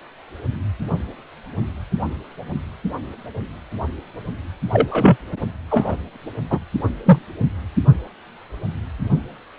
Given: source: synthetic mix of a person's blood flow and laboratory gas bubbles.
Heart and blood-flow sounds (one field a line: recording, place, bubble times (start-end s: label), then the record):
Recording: Doppler ultrasound of blood flow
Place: precordium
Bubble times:
4.71-5.16 s: bubbles
5.71-5.96 s: bubbles
6.49-6.60 s: bubbles
7.04-7.19 s: bubbles
From the record:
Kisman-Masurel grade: 123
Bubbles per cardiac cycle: 1 to 2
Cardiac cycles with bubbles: 10 to 50%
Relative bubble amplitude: loud (0.450 to 0.775)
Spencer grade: 2 (many but less than half of the cardiac periods contain bubble signals, singularly or in groups)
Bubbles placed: anywhere in the cardiac cycle